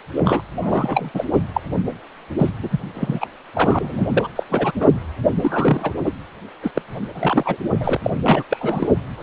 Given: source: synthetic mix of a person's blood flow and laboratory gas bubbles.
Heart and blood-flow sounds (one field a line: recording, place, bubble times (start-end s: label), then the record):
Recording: Doppler ultrasound of blood flow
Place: precordium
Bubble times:
0.15-0.42 s: bubbles
0.61-1.10 s: bubbles
1.14-1.25 s: bubbles
1.32-1.38 s: bubbles
1.53-1.61 s: bubbles
2.38-2.50 s: bubbles
2.63-2.80 s: bubbles
2.94-3.26 s: bubbles
3.54-4.28 s: bubbles
4.35-4.43 s: bubbles
4.50-4.71 s: bubbles
4.79-4.88 s: bubbles
5.41-5.92 s: bubbles
6.04-6.12 s: bubbles
6.62-6.72 s: bubbles
6.75-6.81 s: bubbles
7.14-7.58 s: bubbles
7.79-7.97 s: bubbles
8.04-8.11 s: bubbles
8.23-8.43 s: bubbles
8.49-8.88 s: bubbles
9.20-9.23 s: bubbles
From the record:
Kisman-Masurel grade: 342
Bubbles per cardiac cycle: rolling drumbeat, 9 or more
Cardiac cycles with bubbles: 100%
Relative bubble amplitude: moderate (0.250 to 0.450)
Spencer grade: 3 (all of the cardiac periods contain showers or single bubble signals, but not dominating or overriding the cardiac motion signals)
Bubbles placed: anywhere in the cardiac cycle